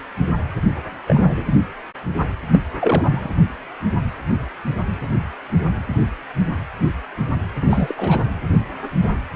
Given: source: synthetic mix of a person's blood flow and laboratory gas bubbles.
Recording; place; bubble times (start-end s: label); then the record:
Doppler ultrasound of blood flow; precordium
1.07-1.44 s: bubbles
2.51-2.60 s: bubbles
2.79-3.35 s: bubbles
7.62-8.24 s: bubbles
From the record:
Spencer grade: 2 (many but less than half of the cardiac periods contain bubble signals, singularly or in groups); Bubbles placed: anywhere in the cardiac cycle